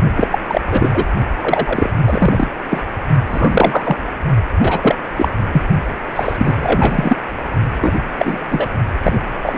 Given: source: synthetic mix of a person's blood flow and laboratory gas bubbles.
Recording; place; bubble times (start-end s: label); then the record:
Doppler ultrasound of blood flow; precordium
0.16-0.28 s: bubbles
0.30-0.39 s: bubbles
0.47-0.61 s: bubbles
0.70-0.89 s: bubbles
0.94-1.05 s: bubbles
1.41-1.90 s: bubbles
2.06-2.48 s: bubbles
2.71-2.84 s: bubbles
3.25-3.96 s: bubbles
4.60-4.95 s: bubbles
5.17-5.29 s: bubbles
5.53-5.62 s: bubbles
6.16-7.17 s: bubbles
7.81-8.00 s: bubbles
8.18-8.38 s: bubbles
8.49-8.70 s: bubbles
9.04-9.20 s: bubbles
9.43-9.57 s: bubbles
From the record:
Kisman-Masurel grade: 243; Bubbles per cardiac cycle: several, 3 to 8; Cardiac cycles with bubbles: 100%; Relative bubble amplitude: loud (0.450 to 0.775); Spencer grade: 3 (all of the cardiac periods contain showers or single bubble signals, but not dominating or overriding the cardiac motion signals); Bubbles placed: only in the low amplitude regions of the cardiac cycle